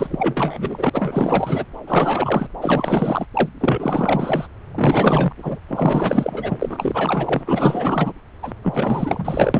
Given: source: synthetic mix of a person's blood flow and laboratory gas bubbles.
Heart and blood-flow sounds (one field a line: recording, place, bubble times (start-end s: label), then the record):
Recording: Doppler ultrasound of blood flow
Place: subclavian vein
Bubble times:
0.00-0.90 s: bubbles
0.93-1.65 s: bubbles
1.86-2.46 s: bubbles
2.61-3.26 s: bubbles
3.33-3.49 s: bubbles
3.60-4.47 s: bubbles
4.75-5.33 s: bubbles
5.36-5.59 s: bubbles
5.67-7.43 s: bubbles
7.46-8.13 s: bubbles
8.42-8.53 s: bubbles
8.63-9.60 s: bubbles
From the record:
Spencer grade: 4 (maximum detectable bubble signal sounding continuously throughout systole and diastole of every cardiac period, and overriding the amplitude of the normal cardiac signals)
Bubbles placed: anywhere in the cardiac cycle